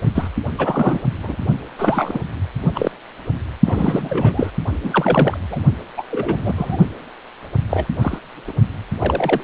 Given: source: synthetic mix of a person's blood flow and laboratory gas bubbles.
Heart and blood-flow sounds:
Doppler ultrasound of blood flow; precordium
0.05-0.10 s: bubbles
0.15-0.30 s: bubbles
0.57-1.08 s: bubbles
1.23-1.36 s: bubbles
1.77-2.21 s: bubbles
2.75-2.91 s: bubbles
3.66-4.50 s: bubbles
4.83-5.38 s: bubbles
5.50-5.59 s: bubbles
5.97-6.03 s: bubbles
6.10-6.53 s: bubbles
6.55-6.78 s: bubbles
7.69-7.86 s: bubbles
8.01-8.19 s: bubbles
8.47-8.53 s: bubbles
8.99-9.44 s: bubbles
From the record:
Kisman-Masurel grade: 242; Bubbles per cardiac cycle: several, 3 to 8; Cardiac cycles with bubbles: 100%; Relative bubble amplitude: moderate (0.250 to 0.450); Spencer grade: 3 (all of the cardiac periods contain showers or single bubble signals, but not dominating or overriding the cardiac motion signals); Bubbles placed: only in the low amplitude regions of the cardiac cycle

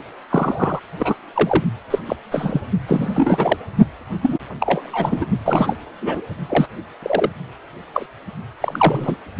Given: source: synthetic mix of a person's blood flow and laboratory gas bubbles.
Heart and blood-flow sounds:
Doppler ultrasound of blood flow; precordium
0.29-0.79 s: bubbles
0.99-1.14 s: bubbles
1.34-1.65 s: bubbles
1.90-1.99 s: bubbles
2.06-2.16 s: bubbles
2.31-2.61 s: bubbles
2.87-3.57 s: bubbles
4.23-4.38 s: bubbles
4.60-5.25 s: bubbles
5.45-5.77 s: bubbles
6.02-6.21 s: bubbles
6.49-6.66 s: bubbles
7.02-7.31 s: bubbles
7.94-8.06 s: bubbles
8.60-9.15 s: bubbles
From the record:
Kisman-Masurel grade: 243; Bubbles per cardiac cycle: several, 3 to 8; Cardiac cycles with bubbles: 100%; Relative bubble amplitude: loud (0.450 to 0.775); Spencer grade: 3 (all of the cardiac periods contain showers or single bubble signals, but not dominating or overriding the cardiac motion signals); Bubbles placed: only in the low amplitude regions of the cardiac cycle

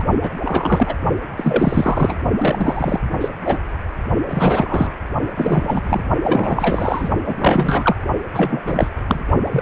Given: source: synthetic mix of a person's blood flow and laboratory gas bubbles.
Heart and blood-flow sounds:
Doppler ultrasound of blood flow; precordium
0.00-0.02 s: bubbles
0.21-0.31 s: bubbles
0.44-0.94 s: bubbles
1.36-2.16 s: bubbles
2.38-3.00 s: bubbles
3.21-3.29 s: bubbles
3.45-3.58 s: bubbles
4.28-4.95 s: bubbles
5.34-6.03 s: bubbles
6.22-7.09 s: bubbles
7.25-7.96 s: bubbles
8.34-8.62 s: bubbles
8.66-8.90 s: bubbles
9.08-9.23 s: bubbles
9.42-9.62 s: bubbles
From the record:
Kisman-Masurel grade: 343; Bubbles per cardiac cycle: rolling drumbeat, 9 or more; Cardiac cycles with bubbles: 100%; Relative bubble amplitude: loud (0.450 to 0.775); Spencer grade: 3 (all of the cardiac periods contain showers or single bubble signals, but not dominating or overriding the cardiac motion signals); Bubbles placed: only in the low amplitude regions of the cardiac cycle

